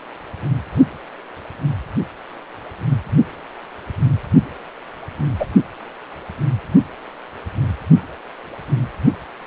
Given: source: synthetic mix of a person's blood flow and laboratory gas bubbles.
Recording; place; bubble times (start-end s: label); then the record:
Doppler ultrasound of blood flow; precordium
5.39-5.46 s: bubbles
From the record:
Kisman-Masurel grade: 113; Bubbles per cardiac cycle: 1 to 2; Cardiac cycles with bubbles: 1 to 10%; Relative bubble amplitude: loud (0.450 to 0.775); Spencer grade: 1 (occasional bubble signal discernible with the cardiac motion signal, with majority of cardiac periods free of bubbles); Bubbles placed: only in the low amplitude regions of the cardiac cycle